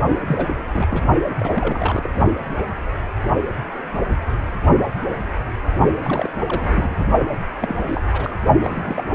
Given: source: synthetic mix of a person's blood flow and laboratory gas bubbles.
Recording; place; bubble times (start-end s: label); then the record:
Doppler ultrasound of blood flow; precordium
0.20-0.55 s: bubbles
0.58-0.65 s: bubbles
0.72-1.02 s: bubbles
1.24-2.09 s: bubbles
6.02-6.30 s: bubbles
6.48-6.96 s: bubbles
6.99-7.06 s: bubbles
7.60-7.75 s: bubbles
7.83-8.01 s: bubbles
8.12-8.39 s: bubbles
8.62-9.04 s: bubbles
From the record:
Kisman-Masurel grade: 332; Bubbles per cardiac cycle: rolling drumbeat, 9 or more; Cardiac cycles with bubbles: 50 to 99%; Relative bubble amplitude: moderate (0.250 to 0.450); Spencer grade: 3 (all of the cardiac periods contain showers or single bubble signals, but not dominating or overriding the cardiac motion signals); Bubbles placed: only in the low amplitude regions of the cardiac cycle